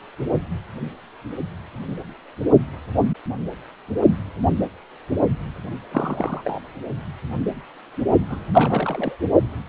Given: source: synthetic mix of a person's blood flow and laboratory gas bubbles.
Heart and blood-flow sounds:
Doppler ultrasound of blood flow; precordium
5.91-6.61 s: bubbles
8.29-8.39 s: bubbles
8.54-9.15 s: bubbles
From the record:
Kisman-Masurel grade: 221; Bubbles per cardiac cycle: several, 3 to 8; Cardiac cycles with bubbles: 10 to 50%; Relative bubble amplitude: barely perceptible (0.100 to 0.250); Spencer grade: 2 (many but less than half of the cardiac periods contain bubble signals, singularly or in groups); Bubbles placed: only in the low amplitude regions of the cardiac cycle

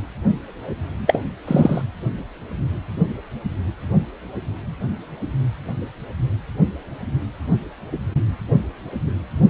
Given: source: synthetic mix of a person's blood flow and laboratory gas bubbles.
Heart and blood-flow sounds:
Doppler ultrasound of blood flow; precordium
1.06-1.22 s: bubbles
1.47-1.81 s: bubbles
From the record:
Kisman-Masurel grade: 113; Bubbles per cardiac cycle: 1 to 2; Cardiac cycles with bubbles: 1 to 10%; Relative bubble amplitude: loud (0.450 to 0.775); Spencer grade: 1 (occasional bubble signal discernible with the cardiac motion signal, with majority of cardiac periods free of bubbles); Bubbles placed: anywhere in the cardiac cycle

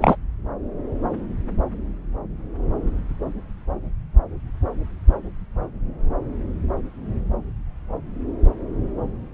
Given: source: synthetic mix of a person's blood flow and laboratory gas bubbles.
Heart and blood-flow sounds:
Doppler ultrasound of blood flow; subclavian vein
0.00-0.16 s: bubbles
From the record:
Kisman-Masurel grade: 213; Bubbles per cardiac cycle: several, 3 to 8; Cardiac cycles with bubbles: 1 to 10%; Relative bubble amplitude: loud (0.450 to 0.775); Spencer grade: 1 (occasional bubble signal discernible with the cardiac motion signal, with majority of cardiac periods free of bubbles); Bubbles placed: anywhere in the cardiac cycle

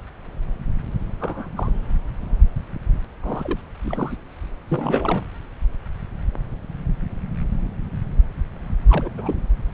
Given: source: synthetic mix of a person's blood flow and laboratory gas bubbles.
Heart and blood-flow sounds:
Doppler ultrasound of blood flow; subclavian vein
1.20-1.48 s: bubbles
1.56-1.71 s: bubbles
3.23-3.60 s: bubbles
3.82-4.16 s: bubbles
4.69-5.26 s: bubbles
8.89-9.10 s: bubbles
9.17-9.39 s: bubbles
From the record:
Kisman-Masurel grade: 221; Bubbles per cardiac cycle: several, 3 to 8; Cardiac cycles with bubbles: 10 to 50%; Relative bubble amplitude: barely perceptible (0.100 to 0.250); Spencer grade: 2 (many but less than half of the cardiac periods contain bubble signals, singularly or in groups); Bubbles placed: anywhere in the cardiac cycle

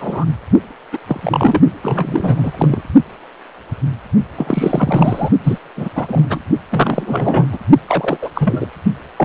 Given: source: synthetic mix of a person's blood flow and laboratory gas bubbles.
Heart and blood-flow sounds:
Doppler ultrasound of blood flow; precordium
0.00-0.25 s: bubbles
0.92-0.98 s: bubbles
1.07-1.60 s: bubbles
1.82-2.82 s: bubbles
4.35-5.29 s: bubbles
5.43-5.58 s: bubbles
5.76-5.89 s: bubbles
5.95-6.39 s: bubbles
6.71-7.46 s: bubbles
7.52-7.58 s: bubbles
7.88-8.19 s: bubbles
8.21-8.29 s: bubbles
8.35-8.67 s: bubbles
9.17-9.25 s: bubbles
From the record:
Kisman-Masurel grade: 333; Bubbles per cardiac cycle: rolling drumbeat, 9 or more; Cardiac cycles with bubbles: 50 to 99%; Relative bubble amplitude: loud (0.450 to 0.775); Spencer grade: 3 (all of the cardiac periods contain showers or single bubble signals, but not dominating or overriding the cardiac motion signals); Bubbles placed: only in the low amplitude regions of the cardiac cycle

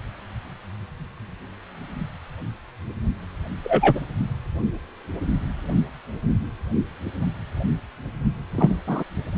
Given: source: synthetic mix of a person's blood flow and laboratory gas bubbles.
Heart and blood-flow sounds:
Doppler ultrasound of blood flow; precordium
3.64-4.00 s: bubbles
8.54-8.75 s: bubbles
8.87-9.04 s: bubbles
From the record:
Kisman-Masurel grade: 123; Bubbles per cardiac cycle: 1 to 2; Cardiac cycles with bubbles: 10 to 50%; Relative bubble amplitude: loud (0.450 to 0.775); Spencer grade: 2 (many but less than half of the cardiac periods contain bubble signals, singularly or in groups); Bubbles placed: only in the low amplitude regions of the cardiac cycle

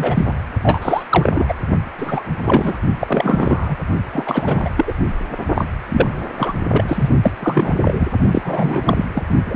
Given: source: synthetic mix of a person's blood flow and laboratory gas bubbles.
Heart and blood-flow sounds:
Doppler ultrasound of blood flow; precordium
0.00-0.40 s: bubbles
0.62-1.03 s: bubbles
1.09-1.54 s: bubbles
1.97-2.24 s: bubbles
2.42-2.78 s: bubbles
3.01-3.77 s: bubbles
4.12-4.70 s: bubbles
4.76-4.94 s: bubbles
5.54-5.65 s: bubbles
5.90-6.24 s: bubbles
6.37-6.53 s: bubbles
6.71-6.84 s: bubbles
6.88-7.09 s: bubbles
7.23-7.31 s: bubbles
7.39-7.75 s: bubbles
7.84-8.07 s: bubbles
8.31-9.05 s: bubbles
9.14-9.23 s: bubbles
9.46-9.56 s: bubbles
From the record:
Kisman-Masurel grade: 343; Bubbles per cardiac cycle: rolling drumbeat, 9 or more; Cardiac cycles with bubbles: 100%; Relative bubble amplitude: loud (0.450 to 0.775); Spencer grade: 3 (all of the cardiac periods contain showers or single bubble signals, but not dominating or overriding the cardiac motion signals); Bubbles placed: only in the low amplitude regions of the cardiac cycle

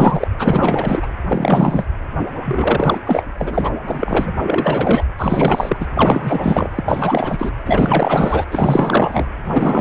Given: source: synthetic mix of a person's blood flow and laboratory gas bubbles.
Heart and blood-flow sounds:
Doppler ultrasound of blood flow; precordium
0.00-0.28 s: bubbles
0.39-1.08 s: bubbles
1.27-1.85 s: bubbles
2.45-2.99 s: bubbles
3.06-3.24 s: bubbles
3.38-3.71 s: bubbles
3.88-4.33 s: bubbles
4.42-5.05 s: bubbles
5.18-5.77 s: bubbles
5.80-5.86 s: bubbles
5.94-6.70 s: bubbles
6.75-7.53 s: bubbles
7.65-8.45 s: bubbles
8.51-9.25 s: bubbles
9.44-9.81 s: bubbles
From the record:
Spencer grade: 4 (maximum detectable bubble signal sounding continuously throughout systole and diastole of every cardiac period, and overriding the amplitude of the normal cardiac signals); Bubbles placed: anywhere in the cardiac cycle

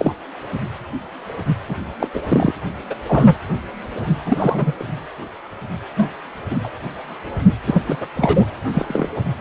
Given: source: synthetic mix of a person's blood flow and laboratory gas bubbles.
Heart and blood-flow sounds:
Doppler ultrasound of blood flow; precordium
0.00-0.13 s: bubbles
1.69-1.76 s: bubbles
2.00-2.08 s: bubbles
2.13-2.21 s: bubbles
2.28-2.54 s: bubbles
2.90-2.95 s: bubbles
3.07-3.37 s: bubbles
4.25-4.72 s: bubbles
4.79-4.84 s: bubbles
5.96-6.13 s: bubbles
6.50-6.58 s: bubbles
6.63-6.69 s: bubbles
7.66-7.83 s: bubbles
7.87-7.96 s: bubbles
8.01-8.07 s: bubbles
8.16-8.47 s: bubbles
8.73-9.09 s: bubbles
9.16-9.21 s: bubbles
From the record:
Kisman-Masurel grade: 233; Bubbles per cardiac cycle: several, 3 to 8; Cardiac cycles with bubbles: 50 to 99%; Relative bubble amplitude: loud (0.450 to 0.775); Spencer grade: 3 (all of the cardiac periods contain showers or single bubble signals, but not dominating or overriding the cardiac motion signals); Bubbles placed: anywhere in the cardiac cycle

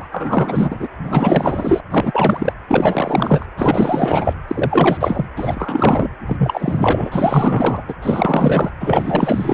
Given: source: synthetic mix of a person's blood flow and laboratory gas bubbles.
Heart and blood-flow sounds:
Doppler ultrasound of blood flow; precordium
0.00-0.08 s: bubbles
0.11-0.88 s: bubbles
1.03-1.80 s: bubbles
1.90-2.53 s: bubbles
2.68-3.46 s: bubbles
3.56-4.33 s: bubbles
4.48-5.25 s: bubbles
5.37-6.09 s: bubbles
6.26-7.83 s: bubbles
7.88-7.94 s: bubbles
8.02-8.71 s: bubbles
8.79-9.54 s: bubbles
From the record:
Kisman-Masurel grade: 444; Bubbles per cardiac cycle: continuous sound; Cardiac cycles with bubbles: 100%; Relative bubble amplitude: maximal (0.775 to 0.999); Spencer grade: 4 (maximum detectable bubble signal sounding continuously throughout systole and diastole of every cardiac period, and overriding the amplitude of the normal cardiac signals); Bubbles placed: anywhere in the cardiac cycle

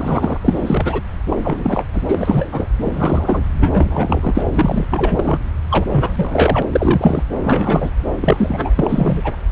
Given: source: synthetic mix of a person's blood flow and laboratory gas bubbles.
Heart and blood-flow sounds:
Doppler ultrasound of blood flow; subclavian vein
0.00-0.38 s: bubbles
0.41-1.02 s: bubbles
1.31-1.38 s: bubbles
1.43-1.83 s: bubbles
1.93-2.02 s: bubbles
2.08-2.68 s: bubbles
2.83-3.44 s: bubbles
3.58-4.44 s: bubbles
4.54-4.87 s: bubbles
4.91-5.41 s: bubbles
5.70-5.86 s: bubbles
5.92-6.62 s: bubbles
6.67-7.23 s: bubbles
7.40-7.91 s: bubbles
8.21-9.36 s: bubbles
From the record:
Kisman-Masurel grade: 343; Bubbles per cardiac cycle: rolling drumbeat, 9 or more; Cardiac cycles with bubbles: 100%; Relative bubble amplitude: loud (0.450 to 0.775); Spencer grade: 3 (all of the cardiac periods contain showers or single bubble signals, but not dominating or overriding the cardiac motion signals); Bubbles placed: anywhere in the cardiac cycle

